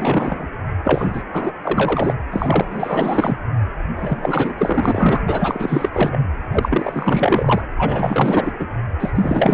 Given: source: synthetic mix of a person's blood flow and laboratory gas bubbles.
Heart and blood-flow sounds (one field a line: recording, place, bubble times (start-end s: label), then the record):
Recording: Doppler ultrasound of blood flow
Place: precordium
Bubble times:
0.00-0.48 s: bubbles
0.83-1.23 s: bubbles
1.32-1.52 s: bubbles
1.63-2.14 s: bubbles
2.31-3.37 s: bubbles
3.96-4.54 s: bubbles
4.58-5.21 s: bubbles
5.28-5.90 s: bubbles
5.92-6.19 s: bubbles
6.52-7.62 s: bubbles
7.76-8.54 s: bubbles
8.59-8.67 s: bubbles
8.99-9.12 s: bubbles
9.15-9.54 s: bubbles
From the record:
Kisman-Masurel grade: 444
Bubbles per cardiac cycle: continuous sound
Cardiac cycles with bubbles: 100%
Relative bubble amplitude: maximal (0.775 to 0.999)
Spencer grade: 4 (maximum detectable bubble signal sounding continuously throughout systole and diastole of every cardiac period, and overriding the amplitude of the normal cardiac signals)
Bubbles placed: anywhere in the cardiac cycle